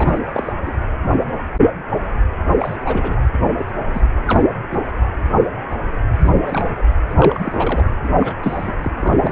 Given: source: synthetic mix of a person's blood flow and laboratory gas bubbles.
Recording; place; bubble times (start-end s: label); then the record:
Doppler ultrasound of blood flow; precordium
0.00-0.25 s: bubbles
0.34-0.53 s: bubbles
0.66-0.72 s: bubbles
2.59-2.77 s: bubbles
2.85-3.20 s: bubbles
3.33-3.38 s: bubbles
3.57-3.66 s: bubbles
3.93-4.01 s: bubbles
4.27-4.43 s: bubbles
4.70-4.81 s: bubbles
6.25-6.31 s: bubbles
6.41-6.85 s: bubbles
7.09-7.14 s: bubbles
7.18-7.85 s: bubbles
8.03-8.09 s: bubbles
8.20-8.35 s: bubbles
8.41-8.74 s: bubbles
8.82-8.90 s: bubbles
8.98-9.32 s: bubbles
From the record:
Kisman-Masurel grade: 232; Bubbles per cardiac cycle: several, 3 to 8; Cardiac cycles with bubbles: 50 to 99%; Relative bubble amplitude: moderate (0.250 to 0.450); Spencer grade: 3 (all of the cardiac periods contain showers or single bubble signals, but not dominating or overriding the cardiac motion signals); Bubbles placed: anywhere in the cardiac cycle